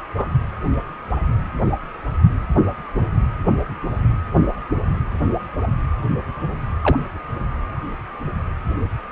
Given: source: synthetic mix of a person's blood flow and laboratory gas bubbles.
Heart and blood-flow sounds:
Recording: Doppler ultrasound of blood flow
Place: precordium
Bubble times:
0.16-0.27 s: bubbles
6.82-6.99 s: bubbles
From the record:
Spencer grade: 2 (many but less than half of the cardiac periods contain bubble signals, singularly or in groups)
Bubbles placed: anywhere in the cardiac cycle

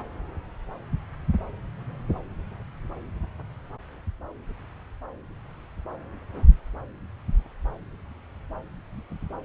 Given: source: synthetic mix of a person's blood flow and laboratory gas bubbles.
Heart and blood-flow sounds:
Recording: Doppler ultrasound of blood flow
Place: subclavian vein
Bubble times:
no bubbles
From the record:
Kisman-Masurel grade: 000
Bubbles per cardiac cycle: 0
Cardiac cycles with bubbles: 0%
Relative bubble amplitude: no bubbles discernible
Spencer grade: 0 (complete lack of bubble signals)

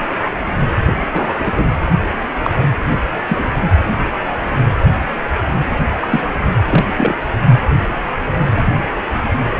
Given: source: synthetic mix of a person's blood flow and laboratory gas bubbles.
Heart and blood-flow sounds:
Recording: Doppler ultrasound of blood flow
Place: precordium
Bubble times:
1.12-1.65 s: bubbles
2.43-2.50 s: bubbles
3.27-3.49 s: bubbles
6.00-6.20 s: bubbles
6.70-6.85 s: bubbles
6.97-7.16 s: bubbles
From the record:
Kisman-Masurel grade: 123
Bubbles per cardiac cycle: 1 to 2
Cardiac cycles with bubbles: 10 to 50%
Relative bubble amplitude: loud (0.450 to 0.775)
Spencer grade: 2 (many but less than half of the cardiac periods contain bubble signals, singularly or in groups)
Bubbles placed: anywhere in the cardiac cycle

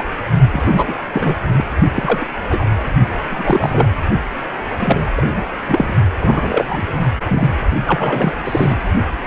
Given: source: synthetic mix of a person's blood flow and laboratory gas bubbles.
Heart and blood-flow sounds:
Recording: Doppler ultrasound of blood flow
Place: precordium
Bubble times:
0.00-0.04 s: bubbles
0.52-0.94 s: bubbles
1.12-1.36 s: bubbles
1.52-1.65 s: bubbles
1.95-2.27 s: bubbles
2.49-2.66 s: bubbles
3.28-3.88 s: bubbles
4.79-5.07 s: bubbles
5.17-5.43 s: bubbles
5.65-5.94 s: bubbles
6.21-6.87 s: bubbles
7.28-7.49 s: bubbles
7.86-8.33 s: bubbles
8.43-8.76 s: bubbles
From the record:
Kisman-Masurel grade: 243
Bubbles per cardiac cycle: several, 3 to 8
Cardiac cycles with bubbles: 100%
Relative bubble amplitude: loud (0.450 to 0.775)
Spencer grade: 3 (all of the cardiac periods contain showers or single bubble signals, but not dominating or overriding the cardiac motion signals)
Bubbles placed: only in the low amplitude regions of the cardiac cycle

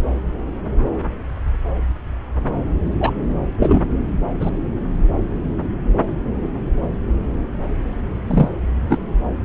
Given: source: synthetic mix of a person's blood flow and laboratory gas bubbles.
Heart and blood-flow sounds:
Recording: Doppler ultrasound of blood flow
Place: subclavian vein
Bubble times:
3.00-3.11 s: bubbles
3.58-3.79 s: bubbles
4.40-4.50 s: bubbles
8.27-8.49 s: bubbles
8.88-8.97 s: bubbles
From the record:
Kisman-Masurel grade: 123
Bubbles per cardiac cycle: 1 to 2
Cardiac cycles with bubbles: 10 to 50%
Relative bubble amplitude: loud (0.450 to 0.775)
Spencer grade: 2 (many but less than half of the cardiac periods contain bubble signals, singularly or in groups)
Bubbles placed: anywhere in the cardiac cycle

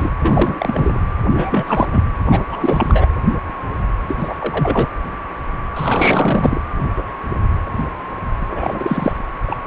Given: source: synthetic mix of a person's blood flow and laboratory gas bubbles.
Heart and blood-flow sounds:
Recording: Doppler ultrasound of blood flow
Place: precordium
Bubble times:
0.00-0.10 s: bubbles
0.22-1.00 s: bubbles
1.34-1.64 s: bubbles
1.67-1.88 s: bubbles
1.92-2.02 s: bubbles
2.30-2.42 s: bubbles
2.51-3.09 s: bubbles
4.07-4.34 s: bubbles
4.40-4.88 s: bubbles
5.76-6.60 s: bubbles
8.50-9.12 s: bubbles
9.46-9.60 s: bubbles
From the record:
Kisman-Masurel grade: 333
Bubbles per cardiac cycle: rolling drumbeat, 9 or more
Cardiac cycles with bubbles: 50 to 99%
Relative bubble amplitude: loud (0.450 to 0.775)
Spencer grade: 3 (all of the cardiac periods contain showers or single bubble signals, but not dominating or overriding the cardiac motion signals)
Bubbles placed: anywhere in the cardiac cycle

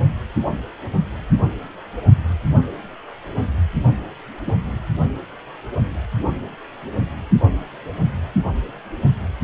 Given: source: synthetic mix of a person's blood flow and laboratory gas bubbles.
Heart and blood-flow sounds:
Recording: Doppler ultrasound of blood flow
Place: precordium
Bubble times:
4.46-4.54 s: bubbles
From the record:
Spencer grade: 1 (occasional bubble signal discernible with the cardiac motion signal, with majority of cardiac periods free of bubbles)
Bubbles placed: only in the low amplitude regions of the cardiac cycle

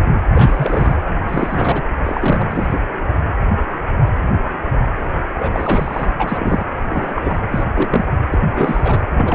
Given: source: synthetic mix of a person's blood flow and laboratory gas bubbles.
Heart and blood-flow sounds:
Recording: Doppler ultrasound of blood flow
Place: precordium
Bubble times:
0.33-0.97 s: bubbles
1.28-1.82 s: bubbles
2.04-2.80 s: bubbles
5.29-6.10 s: bubbles
6.19-6.66 s: bubbles
6.85-7.37 s: bubbles
7.52-7.64 s: bubbles
7.75-8.05 s: bubbles
8.31-8.38 s: bubbles
8.50-9.04 s: bubbles
9.17-9.35 s: bubbles
From the record:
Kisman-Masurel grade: 332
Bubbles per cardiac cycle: rolling drumbeat, 9 or more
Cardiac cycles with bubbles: 50 to 99%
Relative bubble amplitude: moderate (0.250 to 0.450)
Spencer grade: 3 (all of the cardiac periods contain showers or single bubble signals, but not dominating or overriding the cardiac motion signals)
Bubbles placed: anywhere in the cardiac cycle

